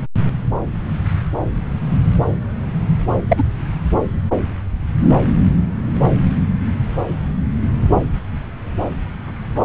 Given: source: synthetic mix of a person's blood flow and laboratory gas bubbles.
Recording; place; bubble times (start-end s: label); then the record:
Doppler ultrasound of blood flow; subclavian vein
3.29-3.44 s: bubbles
From the record:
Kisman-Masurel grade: 113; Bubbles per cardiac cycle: 1 to 2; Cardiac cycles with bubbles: 1 to 10%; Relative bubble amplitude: loud (0.450 to 0.775); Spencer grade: 1 (occasional bubble signal discernible with the cardiac motion signal, with majority of cardiac periods free of bubbles); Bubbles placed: anywhere in the cardiac cycle